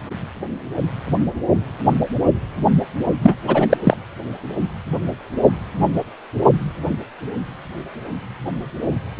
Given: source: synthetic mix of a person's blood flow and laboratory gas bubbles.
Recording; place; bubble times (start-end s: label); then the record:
Doppler ultrasound of blood flow; precordium
3.22-3.36 s: bubbles
3.47-3.78 s: bubbles
3.83-3.97 s: bubbles
From the record:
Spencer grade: 1 (occasional bubble signal discernible with the cardiac motion signal, with majority of cardiac periods free of bubbles); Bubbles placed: only in the low amplitude regions of the cardiac cycle